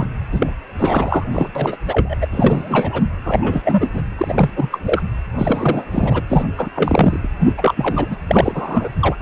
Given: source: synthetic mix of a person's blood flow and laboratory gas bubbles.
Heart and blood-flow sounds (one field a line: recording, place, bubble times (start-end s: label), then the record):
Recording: Doppler ultrasound of blood flow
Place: precordium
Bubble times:
0.00-0.07 s: bubbles
0.32-0.50 s: bubbles
0.78-1.24 s: bubbles
1.31-1.49 s: bubbles
1.55-1.76 s: bubbles
1.86-2.16 s: bubbles
2.21-2.27 s: bubbles
2.32-3.01 s: bubbles
3.25-4.02 s: bubbles
4.17-4.50 s: bubbles
4.55-4.81 s: bubbles
4.85-5.02 s: bubbles
5.38-6.22 s: bubbles
6.29-6.44 s: bubbles
6.57-6.68 s: bubbles
6.75-7.19 s: bubbles
7.22-7.27 s: bubbles
7.39-7.53 s: bubbles
7.57-8.16 s: bubbles
8.28-8.90 s: bubbles
9.00-9.15 s: bubbles
From the record:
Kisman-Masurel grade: 343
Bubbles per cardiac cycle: rolling drumbeat, 9 or more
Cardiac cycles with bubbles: 100%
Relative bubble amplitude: loud (0.450 to 0.775)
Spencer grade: 3 (all of the cardiac periods contain showers or single bubble signals, but not dominating or overriding the cardiac motion signals)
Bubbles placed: anywhere in the cardiac cycle